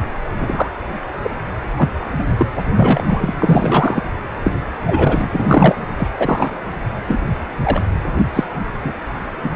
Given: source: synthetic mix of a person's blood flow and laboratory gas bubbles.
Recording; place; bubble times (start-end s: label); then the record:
Doppler ultrasound of blood flow; precordium
0.38-0.70 s: bubbles
1.23-1.31 s: bubbles
1.78-1.89 s: bubbles
2.19-2.24 s: bubbles
2.37-2.46 s: bubbles
2.76-3.34 s: bubbles
3.39-4.04 s: bubbles
4.44-4.54 s: bubbles
4.86-5.75 s: bubbles
5.97-6.08 s: bubbles
6.19-6.56 s: bubbles
7.08-7.18 s: bubbles
7.63-7.82 s: bubbles
8.33-8.44 s: bubbles
8.84-8.93 s: bubbles
9.42-9.51 s: bubbles
From the record:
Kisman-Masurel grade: 243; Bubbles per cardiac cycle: several, 3 to 8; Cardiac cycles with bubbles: 100%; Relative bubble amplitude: loud (0.450 to 0.775); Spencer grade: 3 (all of the cardiac periods contain showers or single bubble signals, but not dominating or overriding the cardiac motion signals); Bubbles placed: anywhere in the cardiac cycle